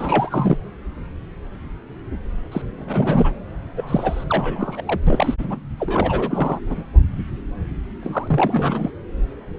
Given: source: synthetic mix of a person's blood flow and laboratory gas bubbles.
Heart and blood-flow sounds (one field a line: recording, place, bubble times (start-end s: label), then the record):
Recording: Doppler ultrasound of blood flow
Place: subclavian vein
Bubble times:
0.00-0.57 s: bubbles
2.52-2.62 s: bubbles
2.78-3.31 s: bubbles
3.77-4.24 s: bubbles
4.29-4.83 s: bubbles
4.86-5.00 s: bubbles
5.07-5.34 s: bubbles
5.38-5.59 s: bubbles
5.79-6.59 s: bubbles
6.67-6.76 s: bubbles
8.03-8.91 s: bubbles
From the record:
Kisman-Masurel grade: 332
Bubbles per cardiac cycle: rolling drumbeat, 9 or more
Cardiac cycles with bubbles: 50 to 99%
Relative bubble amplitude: moderate (0.250 to 0.450)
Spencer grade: 3 (all of the cardiac periods contain showers or single bubble signals, but not dominating or overriding the cardiac motion signals)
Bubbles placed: anywhere in the cardiac cycle